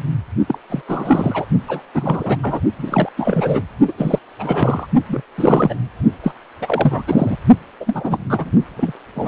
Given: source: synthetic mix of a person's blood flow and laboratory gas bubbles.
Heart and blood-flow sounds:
Doppler ultrasound of blood flow; precordium
0.00-0.04 s: bubbles
0.47-0.58 s: bubbles
0.70-0.82 s: bubbles
0.88-1.46 s: bubbles
1.68-1.81 s: bubbles
1.94-2.37 s: bubbles
2.42-2.60 s: bubbles
2.77-3.09 s: bubbles
3.17-3.62 s: bubbles
3.88-3.92 s: bubbles
3.97-4.19 s: bubbles
4.38-4.87 s: bubbles
5.08-5.22 s: bubbles
5.38-5.75 s: bubbles
6.23-6.34 s: bubbles
6.61-7.03 s: bubbles
7.07-7.37 s: bubbles
7.80-8.52 s: bubbles
8.77-8.92 s: bubbles
9.15-9.27 s: bubbles
From the record:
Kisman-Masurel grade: 342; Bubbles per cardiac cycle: rolling drumbeat, 9 or more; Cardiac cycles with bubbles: 100%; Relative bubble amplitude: moderate (0.250 to 0.450); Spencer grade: 3 (all of the cardiac periods contain showers or single bubble signals, but not dominating or overriding the cardiac motion signals); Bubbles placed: only in the low amplitude regions of the cardiac cycle

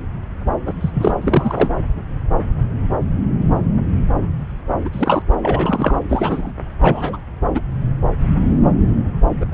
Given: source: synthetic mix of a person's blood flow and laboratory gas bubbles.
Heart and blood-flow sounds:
Doppler ultrasound of blood flow; subclavian vein
0.65-0.73 s: bubbles
0.81-0.90 s: bubbles
0.93-1.15 s: bubbles
1.21-1.70 s: bubbles
4.84-4.89 s: bubbles
4.92-5.22 s: bubbles
5.42-5.98 s: bubbles
6.08-6.51 s: bubbles
6.80-7.17 s: bubbles
7.54-7.61 s: bubbles
9.41-9.45 s: bubbles
From the record:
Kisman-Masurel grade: 223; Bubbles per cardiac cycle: several, 3 to 8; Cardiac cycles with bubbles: 10 to 50%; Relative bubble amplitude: loud (0.450 to 0.775); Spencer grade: 2 (many but less than half of the cardiac periods contain bubble signals, singularly or in groups); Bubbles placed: anywhere in the cardiac cycle

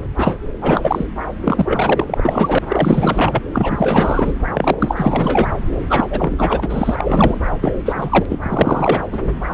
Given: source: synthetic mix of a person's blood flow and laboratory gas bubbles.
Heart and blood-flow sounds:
Doppler ultrasound of blood flow; subclavian vein
0.17-0.38 s: bubbles
0.61-1.08 s: bubbles
1.44-2.58 s: bubbles
2.67-3.42 s: bubbles
3.53-4.33 s: bubbles
4.54-5.48 s: bubbles
5.89-6.07 s: bubbles
6.09-7.39 s: bubbles
7.60-7.76 s: bubbles
7.85-8.26 s: bubbles
8.29-8.39 s: bubbles
8.42-9.00 s: bubbles
9.12-9.19 s: bubbles
From the record:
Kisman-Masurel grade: 444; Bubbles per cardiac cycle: continuous sound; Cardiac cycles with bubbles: 100%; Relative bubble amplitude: maximal (0.775 to 0.999); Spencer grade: 4 (maximum detectable bubble signal sounding continuously throughout systole and diastole of every cardiac period, and overriding the amplitude of the normal cardiac signals); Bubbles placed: anywhere in the cardiac cycle

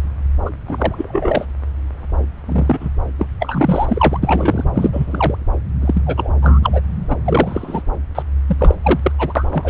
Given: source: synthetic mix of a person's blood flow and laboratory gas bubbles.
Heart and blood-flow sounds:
Doppler ultrasound of blood flow; subclavian vein
0.45-0.50 s: bubbles
0.68-1.45 s: bubbles
2.46-2.89 s: bubbles
3.19-3.27 s: bubbles
3.40-4.19 s: bubbles
4.22-4.64 s: bubbles
4.75-5.36 s: bubbles
5.81-6.02 s: bubbles
6.06-6.29 s: bubbles
6.42-6.59 s: bubbles
6.62-6.80 s: bubbles
7.08-7.17 s: bubbles
7.25-7.83 s: bubbles
8.15-8.23 s: bubbles
8.48-8.79 s: bubbles
8.83-9.00 s: bubbles
9.02-9.12 s: bubbles
9.18-9.46 s: bubbles
9.50-9.70 s: bubbles
From the record:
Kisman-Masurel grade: 233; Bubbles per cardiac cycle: several, 3 to 8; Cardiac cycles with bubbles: 50 to 99%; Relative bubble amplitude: loud (0.450 to 0.775); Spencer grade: 3 (all of the cardiac periods contain showers or single bubble signals, but not dominating or overriding the cardiac motion signals); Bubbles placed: anywhere in the cardiac cycle

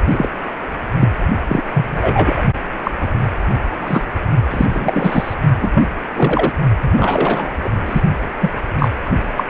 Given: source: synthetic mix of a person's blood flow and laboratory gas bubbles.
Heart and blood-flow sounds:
Doppler ultrasound of blood flow; precordium
0.10-0.29 s: bubbles
0.99-1.09 s: bubbles
1.48-1.62 s: bubbles
1.73-2.42 s: bubbles
2.84-2.92 s: bubbles
3.02-3.07 s: bubbles
3.80-4.04 s: bubbles
4.50-4.66 s: bubbles
4.70-5.35 s: bubbles
5.61-5.72 s: bubbles
5.74-5.87 s: bubbles
6.13-6.53 s: bubbles
6.80-7.51 s: bubbles
7.64-7.70 s: bubbles
7.86-8.02 s: bubbles
8.41-8.52 s: bubbles
8.78-8.88 s: bubbles
9.05-9.10 s: bubbles
9.37-9.45 s: bubbles
From the record:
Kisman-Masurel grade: 233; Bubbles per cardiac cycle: several, 3 to 8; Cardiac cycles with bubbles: 50 to 99%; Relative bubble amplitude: loud (0.450 to 0.775); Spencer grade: 3 (all of the cardiac periods contain showers or single bubble signals, but not dominating or overriding the cardiac motion signals); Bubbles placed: only in the low amplitude regions of the cardiac cycle

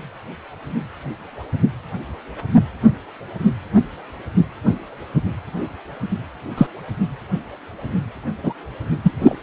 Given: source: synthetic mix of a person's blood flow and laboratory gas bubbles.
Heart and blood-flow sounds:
Doppler ultrasound of blood flow; precordium
6.58-6.67 s: bubbles
8.43-8.53 s: bubbles
9.03-9.12 s: bubbles
9.19-9.35 s: bubbles
From the record:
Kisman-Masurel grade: 123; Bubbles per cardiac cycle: 1 to 2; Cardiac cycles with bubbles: 10 to 50%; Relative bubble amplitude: loud (0.450 to 0.775); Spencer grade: 2 (many but less than half of the cardiac periods contain bubble signals, singularly or in groups); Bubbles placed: anywhere in the cardiac cycle

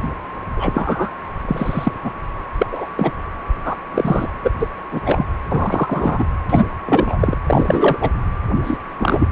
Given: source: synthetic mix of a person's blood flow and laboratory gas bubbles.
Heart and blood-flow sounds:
Doppler ultrasound of blood flow; precordium
0.57-1.10 s: bubbles
1.48-1.92 s: bubbles
2.03-2.10 s: bubbles
2.58-2.67 s: bubbles
2.71-2.86 s: bubbles
2.97-3.11 s: bubbles
3.64-3.76 s: bubbles
3.94-4.28 s: bubbles
4.42-4.51 s: bubbles
4.59-4.68 s: bubbles
4.91-5.01 s: bubbles
5.05-5.26 s: bubbles
5.49-6.25 s: bubbles
6.49-6.64 s: bubbles
6.85-7.37 s: bubbles
7.47-8.10 s: bubbles
8.64-8.78 s: bubbles
8.99-9.28 s: bubbles
From the record:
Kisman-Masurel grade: 233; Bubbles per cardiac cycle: several, 3 to 8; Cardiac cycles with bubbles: 50 to 99%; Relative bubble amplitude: loud (0.450 to 0.775); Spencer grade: 3 (all of the cardiac periods contain showers or single bubble signals, but not dominating or overriding the cardiac motion signals); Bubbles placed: anywhere in the cardiac cycle

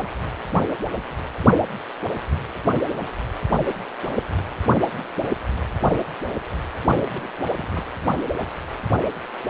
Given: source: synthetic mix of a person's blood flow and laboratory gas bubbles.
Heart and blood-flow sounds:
Doppler ultrasound of blood flow; precordium
5.91-5.99 s: bubbles
6.82-7.31 s: bubbles
7.57-7.82 s: bubbles
From the record:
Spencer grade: 2 (many but less than half of the cardiac periods contain bubble signals, singularly or in groups); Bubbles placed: anywhere in the cardiac cycle

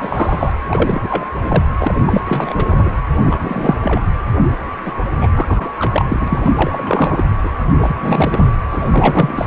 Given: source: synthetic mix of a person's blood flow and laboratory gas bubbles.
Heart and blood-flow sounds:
Doppler ultrasound of blood flow; precordium
0.00-0.53 s: bubbles
0.68-1.24 s: bubbles
1.43-1.64 s: bubbles
1.78-1.94 s: bubbles
2.06-2.21 s: bubbles
2.26-2.89 s: bubbles
3.23-3.75 s: bubbles
3.83-4.00 s: bubbles
4.85-4.92 s: bubbles
5.21-5.29 s: bubbles
5.33-5.70 s: bubbles
5.79-6.05 s: bubbles
6.09-6.52 s: bubbles
6.54-7.23 s: bubbles
7.43-7.49 s: bubbles
7.81-7.96 s: bubbles
8.01-8.52 s: bubbles
8.70-9.47 s: bubbles
From the record:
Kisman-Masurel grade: 343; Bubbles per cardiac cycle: rolling drumbeat, 9 or more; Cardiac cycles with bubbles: 100%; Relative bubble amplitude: loud (0.450 to 0.775); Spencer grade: 3 (all of the cardiac periods contain showers or single bubble signals, but not dominating or overriding the cardiac motion signals); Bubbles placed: anywhere in the cardiac cycle

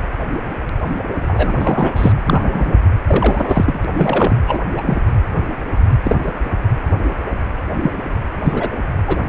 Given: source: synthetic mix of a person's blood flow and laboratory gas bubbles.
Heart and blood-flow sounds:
Doppler ultrasound of blood flow; precordium
1.22-2.12 s: bubbles
2.24-2.75 s: bubbles
3.06-3.81 s: bubbles
3.85-3.89 s: bubbles
3.95-4.36 s: bubbles
4.47-4.60 s: bubbles
4.77-4.82 s: bubbles
4.86-5.02 s: bubbles
6.04-6.16 s: bubbles
6.24-6.33 s: bubbles
7.81-7.91 s: bubbles
8.44-8.69 s: bubbles
9.07-9.21 s: bubbles
From the record:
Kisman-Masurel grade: 233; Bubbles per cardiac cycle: several, 3 to 8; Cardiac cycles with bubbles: 50 to 99%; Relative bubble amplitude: loud (0.450 to 0.775); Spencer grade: 3 (all of the cardiac periods contain showers or single bubble signals, but not dominating or overriding the cardiac motion signals); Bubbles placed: anywhere in the cardiac cycle

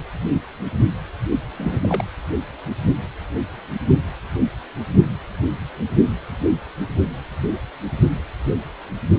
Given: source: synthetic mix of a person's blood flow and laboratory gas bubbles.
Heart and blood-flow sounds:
Doppler ultrasound of blood flow; precordium
1.57-1.79 s: bubbles
1.81-2.04 s: bubbles
From the record:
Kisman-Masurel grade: 112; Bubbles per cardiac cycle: 1 to 2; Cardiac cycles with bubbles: 1 to 10%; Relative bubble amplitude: moderate (0.250 to 0.450); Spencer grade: 1 (occasional bubble signal discernible with the cardiac motion signal, with majority of cardiac periods free of bubbles); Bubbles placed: anywhere in the cardiac cycle

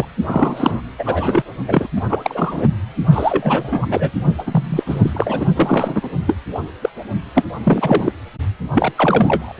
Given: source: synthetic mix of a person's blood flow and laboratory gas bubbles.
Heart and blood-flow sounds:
Doppler ultrasound of blood flow; precordium
0.00-0.05 s: bubbles
0.27-0.81 s: bubbles
0.98-1.43 s: bubbles
1.68-1.87 s: bubbles
1.96-2.01 s: bubbles
2.09-2.68 s: bubbles
3.12-4.11 s: bubbles
4.38-4.43 s: bubbles
4.46-5.46 s: bubbles
5.55-6.09 s: bubbles
6.26-6.35 s: bubbles
6.81-6.89 s: bubbles
7.34-7.46 s: bubbles
7.63-8.12 s: bubbles
8.75-8.93 s: bubbles
8.96-9.53 s: bubbles
From the record:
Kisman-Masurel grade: 343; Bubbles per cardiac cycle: rolling drumbeat, 9 or more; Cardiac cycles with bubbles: 100%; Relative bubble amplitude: loud (0.450 to 0.775); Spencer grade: 3 (all of the cardiac periods contain showers or single bubble signals, but not dominating or overriding the cardiac motion signals); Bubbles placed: only in the low amplitude regions of the cardiac cycle

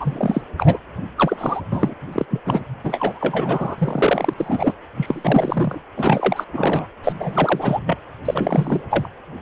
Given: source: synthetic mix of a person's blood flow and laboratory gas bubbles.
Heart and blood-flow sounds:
Doppler ultrasound of blood flow; precordium
0.00-0.41 s: bubbles
0.57-0.78 s: bubbles
1.18-1.61 s: bubbles
1.72-1.95 s: bubbles
2.12-2.26 s: bubbles
2.30-2.41 s: bubbles
2.45-2.65 s: bubbles
2.83-4.33 s: bubbles
4.37-4.73 s: bubbles
4.96-5.81 s: bubbles
5.96-6.45 s: bubbles
6.53-6.87 s: bubbles
7.04-7.80 s: bubbles
7.86-7.97 s: bubbles
8.25-8.81 s: bubbles
8.89-9.08 s: bubbles
From the record:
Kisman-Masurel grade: 343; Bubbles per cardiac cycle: rolling drumbeat, 9 or more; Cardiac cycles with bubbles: 100%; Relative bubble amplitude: loud (0.450 to 0.775); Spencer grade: 3 (all of the cardiac periods contain showers or single bubble signals, but not dominating or overriding the cardiac motion signals); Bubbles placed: anywhere in the cardiac cycle

